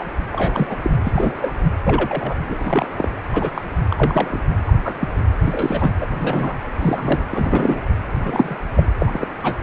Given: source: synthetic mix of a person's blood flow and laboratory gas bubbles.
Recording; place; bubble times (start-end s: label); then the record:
Doppler ultrasound of blood flow; precordium
0.00-0.04 s: bubbles
0.33-0.77 s: bubbles
0.83-0.91 s: bubbles
1.03-1.51 s: bubbles
1.83-2.37 s: bubbles
2.49-2.88 s: bubbles
2.97-3.11 s: bubbles
3.33-3.51 s: bubbles
3.54-3.65 s: bubbles
3.90-4.40 s: bubbles
4.67-4.73 s: bubbles
4.84-4.95 s: bubbles
5.00-5.08 s: bubbles
5.40-5.91 s: bubbles
6.02-6.07 s: bubbles
6.12-6.54 s: bubbles
6.79-7.28 s: bubbles
7.31-7.82 s: bubbles
8.23-8.57 s: bubbles
8.77-8.88 s: bubbles
9.00-9.27 s: bubbles
9.43-9.59 s: bubbles
From the record:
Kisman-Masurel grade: 242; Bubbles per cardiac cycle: several, 3 to 8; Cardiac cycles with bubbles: 100%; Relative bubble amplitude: moderate (0.250 to 0.450); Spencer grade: 3 (all of the cardiac periods contain showers or single bubble signals, but not dominating or overriding the cardiac motion signals); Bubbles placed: anywhere in the cardiac cycle